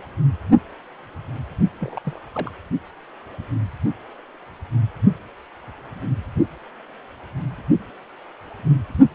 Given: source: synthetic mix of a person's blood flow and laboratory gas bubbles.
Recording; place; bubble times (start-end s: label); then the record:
Doppler ultrasound of blood flow; precordium
1.80-2.01 s: bubbles
2.05-2.19 s: bubbles
2.33-2.51 s: bubbles
From the record:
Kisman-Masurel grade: 211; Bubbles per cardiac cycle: several, 3 to 8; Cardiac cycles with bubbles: 1 to 10%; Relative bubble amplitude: barely perceptible (0.100 to 0.250); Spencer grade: 1 (occasional bubble signal discernible with the cardiac motion signal, with majority of cardiac periods free of bubbles); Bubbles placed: only in the low amplitude regions of the cardiac cycle